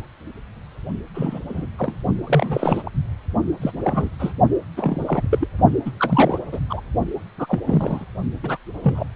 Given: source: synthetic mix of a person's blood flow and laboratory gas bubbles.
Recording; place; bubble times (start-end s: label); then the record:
Doppler ultrasound of blood flow; precordium
1.14-1.40 s: bubbles
1.49-1.67 s: bubbles
1.78-1.96 s: bubbles
2.27-2.82 s: bubbles
2.87-2.91 s: bubbles
3.61-3.72 s: bubbles
3.84-4.09 s: bubbles
4.19-4.33 s: bubbles
4.76-5.27 s: bubbles
5.30-5.47 s: bubbles
5.85-5.91 s: bubbles
5.99-6.39 s: bubbles
6.52-6.59 s: bubbles
6.69-6.80 s: bubbles
7.38-7.59 s: bubbles
7.67-8.05 s: bubbles
8.43-8.57 s: bubbles
8.84-9.04 s: bubbles
From the record:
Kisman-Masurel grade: 242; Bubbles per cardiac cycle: several, 3 to 8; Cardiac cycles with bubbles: 100%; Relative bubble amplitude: moderate (0.250 to 0.450); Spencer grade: 3 (all of the cardiac periods contain showers or single bubble signals, but not dominating or overriding the cardiac motion signals); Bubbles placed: only in the low amplitude regions of the cardiac cycle